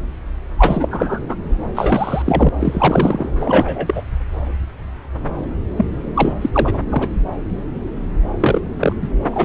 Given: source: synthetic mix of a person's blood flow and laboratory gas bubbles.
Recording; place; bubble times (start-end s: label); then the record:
Doppler ultrasound of blood flow; subclavian vein
0.58-1.35 s: bubbles
1.74-2.22 s: bubbles
2.25-2.49 s: bubbles
2.60-3.29 s: bubbles
3.40-4.02 s: bubbles
5.77-5.86 s: bubbles
6.14-6.33 s: bubbles
6.41-6.50 s: bubbles
6.52-6.79 s: bubbles
6.90-7.08 s: bubbles
8.40-8.62 s: bubbles
8.79-8.93 s: bubbles
9.02-9.08 s: bubbles
9.31-9.45 s: bubbles
From the record:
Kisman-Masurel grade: 333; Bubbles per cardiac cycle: rolling drumbeat, 9 or more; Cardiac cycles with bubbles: 50 to 99%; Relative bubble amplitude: loud (0.450 to 0.775); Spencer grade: 3 (all of the cardiac periods contain showers or single bubble signals, but not dominating or overriding the cardiac motion signals); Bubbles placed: anywhere in the cardiac cycle